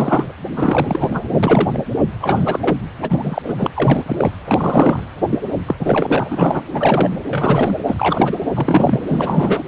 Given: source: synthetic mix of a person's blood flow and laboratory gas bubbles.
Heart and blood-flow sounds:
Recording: Doppler ultrasound of blood flow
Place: precordium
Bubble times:
0.00-0.32 s: bubbles
0.56-1.25 s: bubbles
1.28-1.38 s: bubbles
1.43-1.69 s: bubbles
1.73-1.83 s: bubbles
2.21-2.77 s: bubbles
3.02-3.71 s: bubbles
3.75-4.31 s: bubbles
4.46-5.06 s: bubbles
5.29-5.38 s: bubbles
5.67-5.75 s: bubbles
5.79-6.61 s: bubbles
6.74-7.10 s: bubbles
7.30-7.76 s: bubbles
7.86-8.37 s: bubbles
8.55-9.03 s: bubbles
9.06-9.63 s: bubbles
From the record:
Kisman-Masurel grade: 333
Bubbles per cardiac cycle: rolling drumbeat, 9 or more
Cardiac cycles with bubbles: 50 to 99%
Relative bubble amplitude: loud (0.450 to 0.775)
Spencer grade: 3 (all of the cardiac periods contain showers or single bubble signals, but not dominating or overriding the cardiac motion signals)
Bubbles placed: anywhere in the cardiac cycle

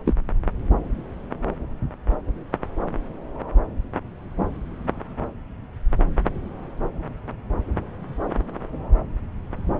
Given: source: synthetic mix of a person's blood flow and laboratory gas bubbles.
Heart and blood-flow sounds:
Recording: Doppler ultrasound of blood flow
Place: subclavian vein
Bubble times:
0.05-0.14 s: bubbles
From the record:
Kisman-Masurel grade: 113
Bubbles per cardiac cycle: 1 to 2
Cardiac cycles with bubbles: 1 to 10%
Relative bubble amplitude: loud (0.450 to 0.775)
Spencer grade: 1 (occasional bubble signal discernible with the cardiac motion signal, with majority of cardiac periods free of bubbles)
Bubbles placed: anywhere in the cardiac cycle

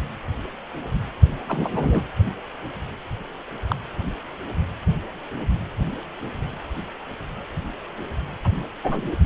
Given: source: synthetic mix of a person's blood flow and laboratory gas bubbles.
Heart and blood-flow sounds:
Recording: Doppler ultrasound of blood flow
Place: precordium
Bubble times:
1.48-2.03 s: bubbles
3.68-3.76 s: bubbles
8.44-8.48 s: bubbles
8.83-9.01 s: bubbles
From the record:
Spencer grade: 2 (many but less than half of the cardiac periods contain bubble signals, singularly or in groups)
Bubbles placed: anywhere in the cardiac cycle

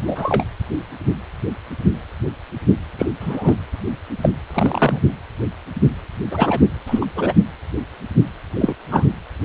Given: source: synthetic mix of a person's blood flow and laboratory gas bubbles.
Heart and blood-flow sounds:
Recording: Doppler ultrasound of blood flow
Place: precordium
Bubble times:
0.07-0.44 s: bubbles
2.99-3.06 s: bubbles
3.21-3.57 s: bubbles
4.23-4.29 s: bubbles
4.54-5.00 s: bubbles
6.30-6.61 s: bubbles
6.86-7.06 s: bubbles
7.15-7.33 s: bubbles
8.60-8.76 s: bubbles
8.91-9.05 s: bubbles
From the record:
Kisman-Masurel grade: 223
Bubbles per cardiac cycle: several, 3 to 8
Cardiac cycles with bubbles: 10 to 50%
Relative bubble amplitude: loud (0.450 to 0.775)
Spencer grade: 2 (many but less than half of the cardiac periods contain bubble signals, singularly or in groups)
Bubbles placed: anywhere in the cardiac cycle

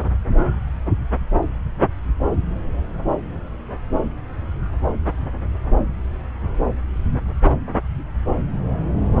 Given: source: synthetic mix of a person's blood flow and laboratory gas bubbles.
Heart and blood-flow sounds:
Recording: Doppler ultrasound of blood flow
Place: subclavian vein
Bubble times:
no bubbles
From the record:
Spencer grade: 0 (complete lack of bubble signals)

